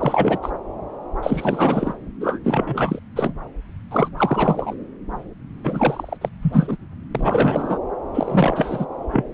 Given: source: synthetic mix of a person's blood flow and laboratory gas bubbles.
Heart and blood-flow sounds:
Doppler ultrasound of blood flow; subclavian vein
0.00-0.39 s: bubbles
0.42-0.51 s: bubbles
1.23-1.93 s: bubbles
2.21-2.38 s: bubbles
2.45-2.99 s: bubbles
3.16-3.33 s: bubbles
3.91-4.08 s: bubbles
4.17-4.74 s: bubbles
5.63-6.17 s: bubbles
6.21-6.29 s: bubbles
6.42-6.76 s: bubbles
7.14-7.79 s: bubbles
8.13-8.86 s: bubbles
9.12-9.24 s: bubbles
From the record:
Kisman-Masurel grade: 343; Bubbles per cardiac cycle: rolling drumbeat, 9 or more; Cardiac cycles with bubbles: 100%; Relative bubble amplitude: loud (0.450 to 0.775); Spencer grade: 3 (all of the cardiac periods contain showers or single bubble signals, but not dominating or overriding the cardiac motion signals); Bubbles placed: anywhere in the cardiac cycle

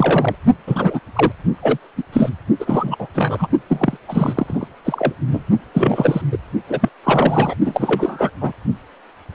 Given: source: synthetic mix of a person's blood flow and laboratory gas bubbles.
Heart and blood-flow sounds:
Doppler ultrasound of blood flow; precordium
0.00-0.35 s: bubbles
0.67-0.99 s: bubbles
1.16-1.32 s: bubbles
1.62-1.78 s: bubbles
1.97-2.03 s: bubbles
2.12-2.29 s: bubbles
2.59-3.07 s: bubbles
3.13-3.47 s: bubbles
3.69-3.97 s: bubbles
4.08-4.68 s: bubbles
4.84-5.13 s: bubbles
5.27-5.43 s: bubbles
5.74-6.21 s: bubbles
6.31-6.38 s: bubbles
6.68-6.89 s: bubbles
7.04-7.54 s: bubbles
7.64-8.30 s: bubbles
8.40-8.53 s: bubbles
From the record:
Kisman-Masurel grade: 333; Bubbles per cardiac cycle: rolling drumbeat, 9 or more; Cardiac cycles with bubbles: 50 to 99%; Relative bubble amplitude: loud (0.450 to 0.775); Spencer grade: 3 (all of the cardiac periods contain showers or single bubble signals, but not dominating or overriding the cardiac motion signals); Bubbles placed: only in the low amplitude regions of the cardiac cycle

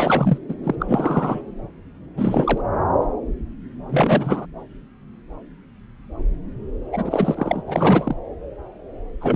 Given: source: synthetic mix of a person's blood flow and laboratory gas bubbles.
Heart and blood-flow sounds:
Doppler ultrasound of blood flow; subclavian vein
0.00-0.38 s: bubbles
0.48-0.55 s: bubbles
0.64-0.76 s: bubbles
0.79-1.42 s: bubbles
2.17-2.61 s: bubbles
3.89-4.46 s: bubbles
6.92-7.62 s: bubbles
7.67-8.15 s: bubbles
9.21-9.36 s: bubbles
From the record:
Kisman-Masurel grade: 333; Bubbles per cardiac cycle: rolling drumbeat, 9 or more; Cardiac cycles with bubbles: 50 to 99%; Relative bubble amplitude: loud (0.450 to 0.775); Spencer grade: 3 (all of the cardiac periods contain showers or single bubble signals, but not dominating or overriding the cardiac motion signals); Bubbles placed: anywhere in the cardiac cycle

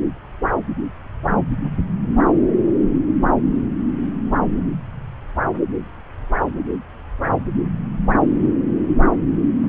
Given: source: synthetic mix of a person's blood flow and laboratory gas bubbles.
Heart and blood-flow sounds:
Doppler ultrasound of blood flow; subclavian vein
no bubbles
From the record:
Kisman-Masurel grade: 000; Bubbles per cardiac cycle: 0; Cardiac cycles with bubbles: 0%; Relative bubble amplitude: no bubbles discernible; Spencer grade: 0 (complete lack of bubble signals)

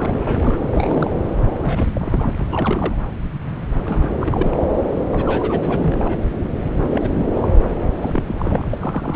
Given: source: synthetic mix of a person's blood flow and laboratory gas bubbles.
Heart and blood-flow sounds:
Doppler ultrasound of blood flow; subclavian vein
0.00-1.19 s: bubbles
1.27-1.36 s: bubbles
1.61-2.33 s: bubbles
2.38-2.98 s: bubbles
3.85-4.12 s: bubbles
4.21-4.63 s: bubbles
5.09-6.19 s: bubbles
6.90-7.11 s: bubbles
7.14-7.26 s: bubbles
7.33-7.60 s: bubbles
7.81-7.95 s: bubbles
8.01-8.23 s: bubbles
8.26-8.66 s: bubbles
8.71-9.16 s: bubbles
From the record:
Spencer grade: 3 (all of the cardiac periods contain showers or single bubble signals, but not dominating or overriding the cardiac motion signals); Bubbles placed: anywhere in the cardiac cycle

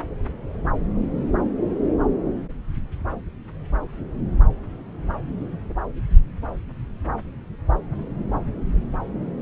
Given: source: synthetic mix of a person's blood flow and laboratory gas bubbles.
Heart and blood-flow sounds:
Doppler ultrasound of blood flow; subclavian vein
no bubbles
From the record:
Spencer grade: 0 (complete lack of bubble signals)

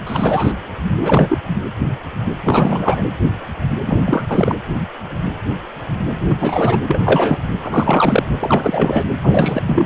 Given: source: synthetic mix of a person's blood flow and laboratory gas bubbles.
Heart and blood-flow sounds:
Doppler ultrasound of blood flow; precordium
0.07-0.52 s: bubbles
1.00-1.39 s: bubbles
2.44-3.03 s: bubbles
3.86-4.01 s: bubbles
4.05-4.26 s: bubbles
4.29-4.56 s: bubbles
6.27-6.36 s: bubbles
6.39-6.79 s: bubbles
6.87-7.02 s: bubbles
7.04-7.43 s: bubbles
7.62-8.23 s: bubbles
8.40-9.04 s: bubbles
9.23-9.62 s: bubbles
9.67-9.86 s: bubbles
From the record:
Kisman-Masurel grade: 333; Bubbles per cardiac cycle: rolling drumbeat, 9 or more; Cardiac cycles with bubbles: 50 to 99%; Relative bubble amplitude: loud (0.450 to 0.775); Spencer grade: 3 (all of the cardiac periods contain showers or single bubble signals, but not dominating or overriding the cardiac motion signals); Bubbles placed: anywhere in the cardiac cycle

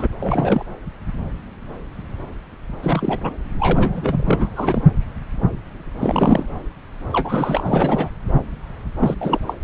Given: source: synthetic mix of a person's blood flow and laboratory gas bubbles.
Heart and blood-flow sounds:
Doppler ultrasound of blood flow; subclavian vein
0.00-0.08 s: bubbles
0.20-0.65 s: bubbles
2.82-3.33 s: bubbles
3.59-4.49 s: bubbles
4.54-4.81 s: bubbles
6.00-6.45 s: bubbles
7.12-8.09 s: bubbles
8.97-9.16 s: bubbles
9.21-9.40 s: bubbles
9.46-9.54 s: bubbles
From the record:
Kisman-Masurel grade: 332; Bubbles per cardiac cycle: rolling drumbeat, 9 or more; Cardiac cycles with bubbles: 50 to 99%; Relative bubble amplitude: moderate (0.250 to 0.450); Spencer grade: 3 (all of the cardiac periods contain showers or single bubble signals, but not dominating or overriding the cardiac motion signals); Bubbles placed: anywhere in the cardiac cycle

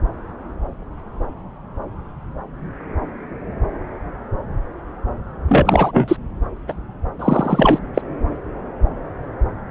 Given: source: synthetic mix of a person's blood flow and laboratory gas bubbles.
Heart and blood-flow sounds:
Doppler ultrasound of blood flow; subclavian vein
5.48-6.17 s: bubbles
6.67-6.74 s: bubbles
7.19-7.79 s: bubbles
7.94-8.02 s: bubbles
From the record:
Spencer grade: 2 (many but less than half of the cardiac periods contain bubble signals, singularly or in groups); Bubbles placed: anywhere in the cardiac cycle

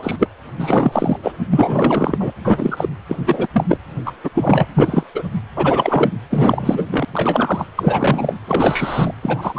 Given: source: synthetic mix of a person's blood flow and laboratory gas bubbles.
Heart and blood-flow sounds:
Doppler ultrasound of blood flow; precordium
0.00-0.16 s: bubbles
0.18-0.28 s: bubbles
0.57-1.17 s: bubbles
1.22-1.32 s: bubbles
1.50-2.32 s: bubbles
2.44-2.89 s: bubbles
3.08-3.17 s: bubbles
3.26-3.48 s: bubbles
3.53-3.65 s: bubbles
3.69-3.79 s: bubbles
4.05-4.12 s: bubbles
4.24-4.29 s: bubbles
4.34-4.67 s: bubbles
4.75-5.06 s: bubbles
5.14-5.22 s: bubbles
5.55-6.11 s: bubbles
6.30-6.83 s: bubbles
6.91-7.05 s: bubbles
7.12-7.65 s: bubbles
7.75-8.39 s: bubbles
8.47-9.14 s: bubbles
9.22-9.59 s: bubbles
From the record:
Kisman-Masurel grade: 343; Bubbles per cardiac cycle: rolling drumbeat, 9 or more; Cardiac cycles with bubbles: 100%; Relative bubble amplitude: loud (0.450 to 0.775); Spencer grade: 3 (all of the cardiac periods contain showers or single bubble signals, but not dominating or overriding the cardiac motion signals); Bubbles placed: anywhere in the cardiac cycle

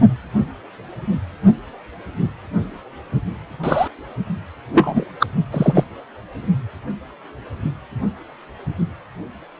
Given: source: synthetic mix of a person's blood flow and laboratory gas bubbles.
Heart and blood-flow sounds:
Doppler ultrasound of blood flow; precordium
3.63-3.88 s: bubbles
4.74-5.05 s: bubbles
5.20-5.27 s: bubbles
5.52-5.84 s: bubbles
From the record:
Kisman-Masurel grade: 123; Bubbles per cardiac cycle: 1 to 2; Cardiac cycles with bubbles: 10 to 50%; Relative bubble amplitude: loud (0.450 to 0.775); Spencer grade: 2 (many but less than half of the cardiac periods contain bubble signals, singularly or in groups); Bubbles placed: only in the low amplitude regions of the cardiac cycle

